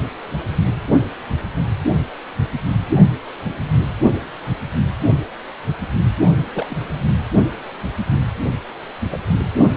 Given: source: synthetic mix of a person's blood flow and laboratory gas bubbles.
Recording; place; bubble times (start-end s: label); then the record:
Doppler ultrasound of blood flow; precordium
6.54-6.66 s: bubbles
6.70-6.76 s: bubbles
9.10-9.25 s: bubbles
From the record:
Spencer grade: 2 (many but less than half of the cardiac periods contain bubble signals, singularly or in groups); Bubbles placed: only in the low amplitude regions of the cardiac cycle